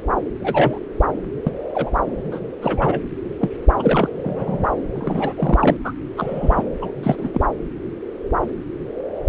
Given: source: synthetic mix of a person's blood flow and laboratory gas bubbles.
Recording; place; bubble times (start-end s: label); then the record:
Doppler ultrasound of blood flow; subclavian vein
0.40-0.78 s: bubbles
1.46-1.51 s: bubbles
1.75-1.90 s: bubbles
2.31-2.40 s: bubbles
2.62-3.01 s: bubbles
3.41-3.51 s: bubbles
3.79-4.09 s: bubbles
4.23-4.67 s: bubbles
4.95-5.33 s: bubbles
5.37-5.76 s: bubbles
5.84-5.92 s: bubbles
6.17-6.63 s: bubbles
6.81-6.91 s: bubbles
7.02-7.31 s: bubbles
7.34-7.40 s: bubbles
From the record:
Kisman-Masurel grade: 232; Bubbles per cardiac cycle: several, 3 to 8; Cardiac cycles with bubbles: 50 to 99%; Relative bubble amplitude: moderate (0.250 to 0.450); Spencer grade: 3 (all of the cardiac periods contain showers or single bubble signals, but not dominating or overriding the cardiac motion signals); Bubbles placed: anywhere in the cardiac cycle